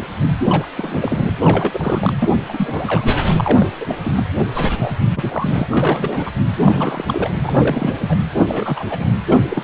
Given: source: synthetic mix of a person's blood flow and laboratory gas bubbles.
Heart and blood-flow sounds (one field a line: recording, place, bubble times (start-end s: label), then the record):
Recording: Doppler ultrasound of blood flow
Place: precordium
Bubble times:
0.41-0.65 s: bubbles
0.77-1.32 s: bubbles
1.41-2.13 s: bubbles
2.19-2.29 s: bubbles
2.48-3.07 s: bubbles
3.29-3.33 s: bubbles
3.36-3.67 s: bubbles
3.80-3.95 s: bubbles
4.04-4.24 s: bubbles
4.54-4.93 s: bubbles
5.16-5.64 s: bubbles
5.68-6.30 s: bubbles
6.64-7.04 s: bubbles
7.07-7.31 s: bubbles
7.43-7.98 s: bubbles
8.01-8.19 s: bubbles
8.42-8.86 s: bubbles
8.90-9.05 s: bubbles
9.27-9.39 s: bubbles
9.49-9.64 s: bubbles
From the record:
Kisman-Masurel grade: 342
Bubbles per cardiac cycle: rolling drumbeat, 9 or more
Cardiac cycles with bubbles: 100%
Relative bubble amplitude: moderate (0.250 to 0.450)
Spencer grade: 3 (all of the cardiac periods contain showers or single bubble signals, but not dominating or overriding the cardiac motion signals)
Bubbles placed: anywhere in the cardiac cycle